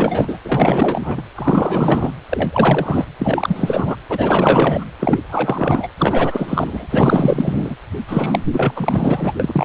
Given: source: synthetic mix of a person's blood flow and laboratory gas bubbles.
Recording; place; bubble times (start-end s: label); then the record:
Doppler ultrasound of blood flow; precordium
0.00-0.38 s: bubbles
0.44-1.23 s: bubbles
1.35-2.11 s: bubbles
2.29-3.06 s: bubbles
3.19-3.96 s: bubbles
4.09-4.85 s: bubbles
5.00-5.19 s: bubbles
5.28-5.88 s: bubbles
5.99-6.87 s: bubbles
6.91-7.76 s: bubbles
8.07-8.45 s: bubbles
8.53-9.34 s: bubbles
9.39-9.65 s: bubbles
From the record:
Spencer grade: 4 (maximum detectable bubble signal sounding continuously throughout systole and diastole of every cardiac period, and overriding the amplitude of the normal cardiac signals); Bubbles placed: anywhere in the cardiac cycle